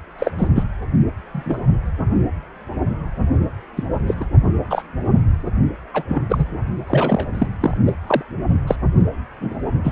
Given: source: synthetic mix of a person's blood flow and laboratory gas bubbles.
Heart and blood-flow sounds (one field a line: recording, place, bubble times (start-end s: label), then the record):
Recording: Doppler ultrasound of blood flow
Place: precordium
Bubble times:
0.18-0.31 s: bubbles
0.38-0.47 s: bubbles
0.55-0.64 s: bubbles
1.33-1.59 s: bubbles
3.76-3.84 s: bubbles
4.08-4.15 s: bubbles
4.20-4.25 s: bubbles
4.70-4.82 s: bubbles
5.94-6.04 s: bubbles
6.08-6.46 s: bubbles
6.87-7.27 s: bubbles
7.33-7.46 s: bubbles
7.61-7.75 s: bubbles
7.86-7.93 s: bubbles
8.06-8.22 s: bubbles
8.67-8.76 s: bubbles
9.40-9.61 s: bubbles
9.84-9.92 s: bubbles
From the record:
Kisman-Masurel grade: 232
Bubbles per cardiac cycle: several, 3 to 8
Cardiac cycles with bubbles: 50 to 99%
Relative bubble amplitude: moderate (0.250 to 0.450)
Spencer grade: 3 (all of the cardiac periods contain showers or single bubble signals, but not dominating or overriding the cardiac motion signals)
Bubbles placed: only in the low amplitude regions of the cardiac cycle